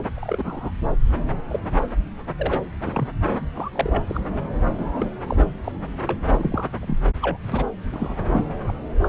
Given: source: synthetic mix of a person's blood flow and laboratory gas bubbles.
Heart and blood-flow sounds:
Doppler ultrasound of blood flow; subclavian vein
0.15-0.72 s: bubbles
1.50-1.59 s: bubbles
2.38-2.61 s: bubbles
2.86-3.09 s: bubbles
3.29-3.38 s: bubbles
3.54-3.70 s: bubbles
3.75-4.04 s: bubbles
4.08-4.21 s: bubbles
4.78-5.10 s: bubbles
5.27-5.37 s: bubbles
5.64-5.72 s: bubbles
6.00-6.16 s: bubbles
6.29-6.67 s: bubbles
6.80-6.96 s: bubbles
7.21-7.37 s: bubbles
7.51-7.64 s: bubbles
7.92-8.45 s: bubbles
8.67-8.73 s: bubbles
9.02-9.08 s: bubbles
From the record:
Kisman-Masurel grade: 242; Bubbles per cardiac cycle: several, 3 to 8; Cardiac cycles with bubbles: 100%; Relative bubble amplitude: moderate (0.250 to 0.450); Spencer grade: 3 (all of the cardiac periods contain showers or single bubble signals, but not dominating or overriding the cardiac motion signals); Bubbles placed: anywhere in the cardiac cycle

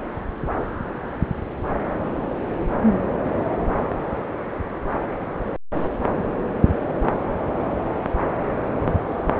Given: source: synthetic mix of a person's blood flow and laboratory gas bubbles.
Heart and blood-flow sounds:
Doppler ultrasound of blood flow; subclavian vein
no bubbles
From the record:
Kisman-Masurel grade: 000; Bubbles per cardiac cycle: 0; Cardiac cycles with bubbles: 0%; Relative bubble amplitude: no bubbles discernible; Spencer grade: 0 (complete lack of bubble signals)

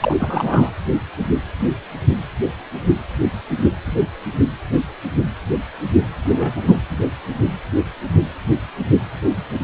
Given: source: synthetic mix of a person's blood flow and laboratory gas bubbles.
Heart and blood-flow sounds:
Doppler ultrasound of blood flow; precordium
0.00-0.16 s: bubbles
0.20-0.70 s: bubbles
6.21-6.62 s: bubbles
6.67-6.82 s: bubbles
From the record:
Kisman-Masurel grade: 222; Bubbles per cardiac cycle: several, 3 to 8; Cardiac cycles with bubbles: 10 to 50%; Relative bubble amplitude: moderate (0.250 to 0.450); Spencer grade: 2 (many but less than half of the cardiac periods contain bubble signals, singularly or in groups); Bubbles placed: anywhere in the cardiac cycle

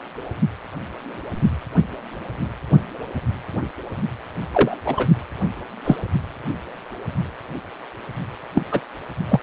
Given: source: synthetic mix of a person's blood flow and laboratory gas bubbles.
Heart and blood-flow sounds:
Doppler ultrasound of blood flow; precordium
4.52-4.77 s: bubbles
4.85-5.07 s: bubbles
5.84-5.96 s: bubbles
8.54-8.65 s: bubbles
8.71-8.80 s: bubbles
9.29-9.40 s: bubbles
From the record:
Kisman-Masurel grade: 123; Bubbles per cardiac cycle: 1 to 2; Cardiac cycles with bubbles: 10 to 50%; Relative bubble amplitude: loud (0.450 to 0.775); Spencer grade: 2 (many but less than half of the cardiac periods contain bubble signals, singularly or in groups); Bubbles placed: only in the low amplitude regions of the cardiac cycle

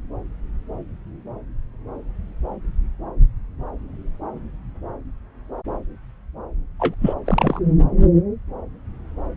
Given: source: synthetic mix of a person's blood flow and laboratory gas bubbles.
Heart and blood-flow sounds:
Doppler ultrasound of blood flow; subclavian vein
6.79-6.95 s: bubbles
7.01-7.14 s: bubbles
7.26-7.59 s: bubbles
From the record:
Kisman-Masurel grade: 212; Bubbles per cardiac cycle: several, 3 to 8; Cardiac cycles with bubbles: 1 to 10%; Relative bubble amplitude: moderate (0.250 to 0.450); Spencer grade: 1 (occasional bubble signal discernible with the cardiac motion signal, with majority of cardiac periods free of bubbles); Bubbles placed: anywhere in the cardiac cycle

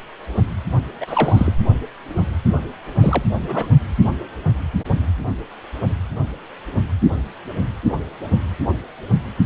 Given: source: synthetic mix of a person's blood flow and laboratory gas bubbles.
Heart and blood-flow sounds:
Doppler ultrasound of blood flow; precordium
1.00-1.52 s: bubbles
3.00-3.23 s: bubbles
3.35-3.69 s: bubbles
From the record:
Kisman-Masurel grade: 222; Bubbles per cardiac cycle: several, 3 to 8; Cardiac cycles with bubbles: 10 to 50%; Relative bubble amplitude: moderate (0.250 to 0.450); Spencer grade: 2 (many but less than half of the cardiac periods contain bubble signals, singularly or in groups); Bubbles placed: only in the low amplitude regions of the cardiac cycle

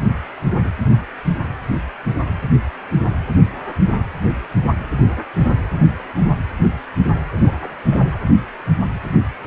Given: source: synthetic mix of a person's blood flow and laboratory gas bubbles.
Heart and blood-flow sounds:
Doppler ultrasound of blood flow; precordium
7.36-7.51 s: bubbles
7.63-7.74 s: bubbles
7.77-7.84 s: bubbles
7.91-8.05 s: bubbles
8.12-8.22 s: bubbles
From the record:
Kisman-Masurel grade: 211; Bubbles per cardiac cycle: several, 3 to 8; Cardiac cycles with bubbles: 1 to 10%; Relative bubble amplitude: barely perceptible (0.100 to 0.250); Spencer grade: 1 (occasional bubble signal discernible with the cardiac motion signal, with majority of cardiac periods free of bubbles); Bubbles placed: anywhere in the cardiac cycle

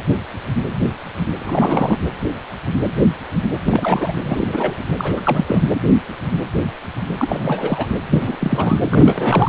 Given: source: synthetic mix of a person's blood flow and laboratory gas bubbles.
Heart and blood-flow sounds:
Doppler ultrasound of blood flow; precordium
1.40-1.97 s: bubbles
3.62-4.12 s: bubbles
4.22-4.78 s: bubbles
4.97-5.21 s: bubbles
5.25-5.62 s: bubbles
7.18-7.86 s: bubbles
8.10-8.36 s: bubbles
8.41-8.81 s: bubbles
8.89-9.49 s: bubbles
From the record:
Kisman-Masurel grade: 332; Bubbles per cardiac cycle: rolling drumbeat, 9 or more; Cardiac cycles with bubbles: 50 to 99%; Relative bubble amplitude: moderate (0.250 to 0.450); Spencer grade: 3 (all of the cardiac periods contain showers or single bubble signals, but not dominating or overriding the cardiac motion signals); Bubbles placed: anywhere in the cardiac cycle

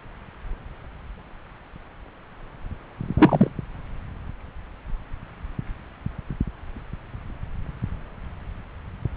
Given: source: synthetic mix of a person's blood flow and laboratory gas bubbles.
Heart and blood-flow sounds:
Doppler ultrasound of blood flow; subclavian vein
3.17-3.50 s: bubbles
From the record:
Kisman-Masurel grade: 113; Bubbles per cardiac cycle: 1 to 2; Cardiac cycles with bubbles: 1 to 10%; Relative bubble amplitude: loud (0.450 to 0.775); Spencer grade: 1 (occasional bubble signal discernible with the cardiac motion signal, with majority of cardiac periods free of bubbles); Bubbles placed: anywhere in the cardiac cycle

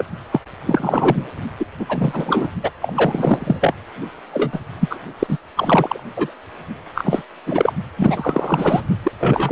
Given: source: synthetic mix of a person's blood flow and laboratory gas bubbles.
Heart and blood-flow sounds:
Doppler ultrasound of blood flow; precordium
0.00-0.04 s: bubbles
0.31-0.40 s: bubbles
0.66-1.29 s: bubbles
1.60-1.66 s: bubbles
1.79-1.86 s: bubbles
1.89-2.50 s: bubbles
2.63-2.70 s: bubbles
2.81-3.74 s: bubbles
4.33-4.59 s: bubbles
4.79-4.99 s: bubbles
5.19-5.37 s: bubbles
5.56-6.00 s: bubbles
6.16-6.33 s: bubbles
6.95-7.22 s: bubbles
7.46-7.73 s: bubbles
7.97-8.81 s: bubbles
9.03-9.12 s: bubbles
9.20-9.52 s: bubbles
From the record:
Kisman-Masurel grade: 343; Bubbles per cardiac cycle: rolling drumbeat, 9 or more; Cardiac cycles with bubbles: 100%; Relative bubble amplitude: loud (0.450 to 0.775); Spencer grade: 3 (all of the cardiac periods contain showers or single bubble signals, but not dominating or overriding the cardiac motion signals); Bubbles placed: only in the low amplitude regions of the cardiac cycle

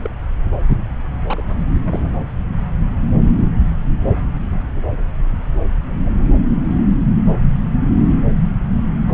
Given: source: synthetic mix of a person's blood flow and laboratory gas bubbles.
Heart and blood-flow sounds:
Doppler ultrasound of blood flow; subclavian vein
0.00-0.10 s: bubbles
1.27-1.44 s: bubbles
1.83-2.09 s: bubbles
6.05-6.09 s: bubbles
9.07-9.14 s: bubbles
From the record:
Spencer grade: 2 (many but less than half of the cardiac periods contain bubble signals, singularly or in groups); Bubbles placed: anywhere in the cardiac cycle

